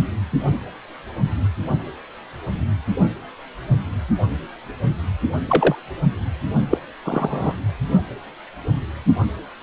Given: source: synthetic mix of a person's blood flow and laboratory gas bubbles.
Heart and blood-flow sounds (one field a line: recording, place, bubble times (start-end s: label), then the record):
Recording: Doppler ultrasound of blood flow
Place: precordium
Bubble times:
5.47-5.75 s: bubbles
6.70-6.78 s: bubbles
7.05-7.54 s: bubbles
From the record:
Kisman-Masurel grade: 123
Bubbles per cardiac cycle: 1 to 2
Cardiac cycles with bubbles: 10 to 50%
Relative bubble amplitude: loud (0.450 to 0.775)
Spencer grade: 2 (many but less than half of the cardiac periods contain bubble signals, singularly or in groups)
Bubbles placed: only in the low amplitude regions of the cardiac cycle